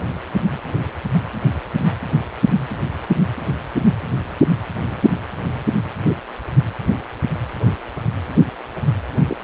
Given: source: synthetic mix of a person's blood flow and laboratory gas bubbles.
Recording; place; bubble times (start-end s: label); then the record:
Doppler ultrasound of blood flow; precordium
9.27-9.37 s: bubbles
From the record:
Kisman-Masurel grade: 111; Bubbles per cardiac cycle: 1 to 2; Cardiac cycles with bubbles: 1 to 10%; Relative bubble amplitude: barely perceptible (0.100 to 0.250); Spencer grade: 1 (occasional bubble signal discernible with the cardiac motion signal, with majority of cardiac periods free of bubbles); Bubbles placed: anywhere in the cardiac cycle